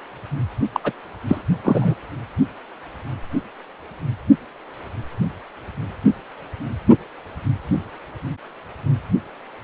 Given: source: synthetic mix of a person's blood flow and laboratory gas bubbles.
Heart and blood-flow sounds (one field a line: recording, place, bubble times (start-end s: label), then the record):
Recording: Doppler ultrasound of blood flow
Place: precordium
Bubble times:
0.72-0.80 s: bubbles
0.83-0.92 s: bubbles
1.27-1.44 s: bubbles
1.64-1.95 s: bubbles
From the record:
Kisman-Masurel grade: 212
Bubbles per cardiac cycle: several, 3 to 8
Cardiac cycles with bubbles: 1 to 10%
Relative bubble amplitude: moderate (0.250 to 0.450)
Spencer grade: 1 (occasional bubble signal discernible with the cardiac motion signal, with majority of cardiac periods free of bubbles)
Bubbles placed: only in the low amplitude regions of the cardiac cycle